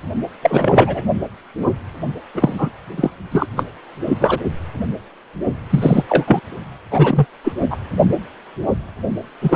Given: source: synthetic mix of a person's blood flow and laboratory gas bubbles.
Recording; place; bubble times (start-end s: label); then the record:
Doppler ultrasound of blood flow; precordium
0.42-1.02 s: bubbles
2.34-2.70 s: bubbles
2.96-3.10 s: bubbles
3.31-3.46 s: bubbles
3.56-3.65 s: bubbles
4.08-4.18 s: bubbles
4.20-4.41 s: bubbles
5.70-6.03 s: bubbles
6.08-6.41 s: bubbles
6.91-7.25 s: bubbles
7.44-7.53 s: bubbles
7.71-7.77 s: bubbles
9.41-9.56 s: bubbles
From the record:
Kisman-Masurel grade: 233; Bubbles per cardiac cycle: several, 3 to 8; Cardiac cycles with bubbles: 50 to 99%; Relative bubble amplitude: loud (0.450 to 0.775); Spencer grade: 3 (all of the cardiac periods contain showers or single bubble signals, but not dominating or overriding the cardiac motion signals); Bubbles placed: only in the low amplitude regions of the cardiac cycle